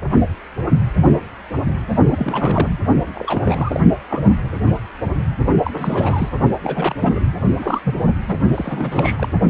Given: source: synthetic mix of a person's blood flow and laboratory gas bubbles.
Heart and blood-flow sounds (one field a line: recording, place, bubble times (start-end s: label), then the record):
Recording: Doppler ultrasound of blood flow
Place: precordium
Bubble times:
2.10-2.79 s: bubbles
3.15-3.80 s: bubbles
4.10-4.21 s: bubbles
5.64-6.29 s: bubbles
6.64-6.95 s: bubbles
7.01-7.21 s: bubbles
7.55-7.81 s: bubbles
7.83-8.00 s: bubbles
8.27-8.37 s: bubbles
8.54-9.29 s: bubbles
From the record:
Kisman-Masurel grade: 332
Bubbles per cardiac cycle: rolling drumbeat, 9 or more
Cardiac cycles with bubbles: 50 to 99%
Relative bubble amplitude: moderate (0.250 to 0.450)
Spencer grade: 3 (all of the cardiac periods contain showers or single bubble signals, but not dominating or overriding the cardiac motion signals)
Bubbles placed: only in the low amplitude regions of the cardiac cycle